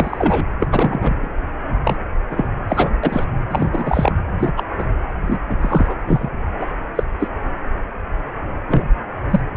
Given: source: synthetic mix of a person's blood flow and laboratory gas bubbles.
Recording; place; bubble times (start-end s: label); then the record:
Doppler ultrasound of blood flow; precordium
0.00-0.46 s: bubbles
0.59-0.67 s: bubbles
0.71-1.29 s: bubbles
1.84-1.96 s: bubbles
2.29-2.47 s: bubbles
2.68-2.90 s: bubbles
3.03-3.24 s: bubbles
3.51-3.69 s: bubbles
3.72-4.12 s: bubbles
4.39-4.53 s: bubbles
4.56-4.64 s: bubbles
4.78-4.85 s: bubbles
5.27-5.40 s: bubbles
5.48-5.58 s: bubbles
5.61-6.02 s: bubbles
6.07-6.29 s: bubbles
6.59-6.67 s: bubbles
6.95-7.04 s: bubbles
7.20-7.28 s: bubbles
8.68-8.85 s: bubbles
9.30-9.39 s: bubbles
From the record:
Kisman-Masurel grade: 233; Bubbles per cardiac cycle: several, 3 to 8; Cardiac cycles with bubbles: 50 to 99%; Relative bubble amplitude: loud (0.450 to 0.775); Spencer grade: 3 (all of the cardiac periods contain showers or single bubble signals, but not dominating or overriding the cardiac motion signals); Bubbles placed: anywhere in the cardiac cycle